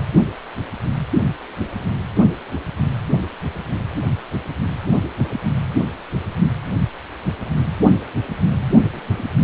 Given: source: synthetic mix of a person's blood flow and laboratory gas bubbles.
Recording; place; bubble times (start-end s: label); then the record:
Doppler ultrasound of blood flow; precordium
8.60-8.66 s: bubbles
8.76-9.00 s: bubbles
9.17-9.24 s: bubbles
9.35-9.44 s: bubbles
From the record:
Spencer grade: 1 (occasional bubble signal discernible with the cardiac motion signal, with majority of cardiac periods free of bubbles); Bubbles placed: anywhere in the cardiac cycle